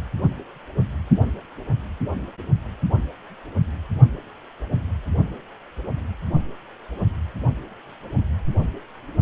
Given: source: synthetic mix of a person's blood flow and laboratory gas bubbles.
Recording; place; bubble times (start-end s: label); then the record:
Doppler ultrasound of blood flow; precordium
no bubbles
From the record:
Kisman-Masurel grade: 000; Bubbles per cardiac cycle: 0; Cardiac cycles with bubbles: 0%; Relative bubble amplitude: no bubbles discernible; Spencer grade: 0 (complete lack of bubble signals)